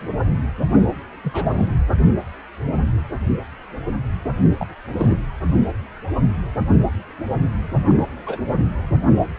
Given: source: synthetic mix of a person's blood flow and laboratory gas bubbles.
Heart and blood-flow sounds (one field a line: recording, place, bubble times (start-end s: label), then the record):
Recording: Doppler ultrasound of blood flow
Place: precordium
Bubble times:
0.00-0.11 s: bubbles
0.66-0.85 s: bubbles
1.22-1.68 s: bubbles
4.59-4.67 s: bubbles
4.87-5.20 s: bubbles
7.88-8.38 s: bubbles
From the record:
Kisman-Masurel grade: 222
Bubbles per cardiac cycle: several, 3 to 8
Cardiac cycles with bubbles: 10 to 50%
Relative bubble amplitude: moderate (0.250 to 0.450)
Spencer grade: 2 (many but less than half of the cardiac periods contain bubble signals, singularly or in groups)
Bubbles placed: anywhere in the cardiac cycle